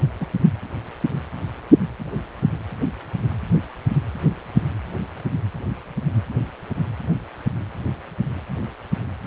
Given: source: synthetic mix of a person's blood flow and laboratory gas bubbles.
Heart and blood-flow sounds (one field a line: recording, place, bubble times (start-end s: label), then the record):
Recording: Doppler ultrasound of blood flow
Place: precordium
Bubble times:
0.20-0.26 s: bubbles
From the record:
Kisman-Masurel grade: 112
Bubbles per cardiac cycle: 1 to 2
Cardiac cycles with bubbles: 1 to 10%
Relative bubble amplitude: moderate (0.250 to 0.450)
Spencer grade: 1 (occasional bubble signal discernible with the cardiac motion signal, with majority of cardiac periods free of bubbles)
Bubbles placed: anywhere in the cardiac cycle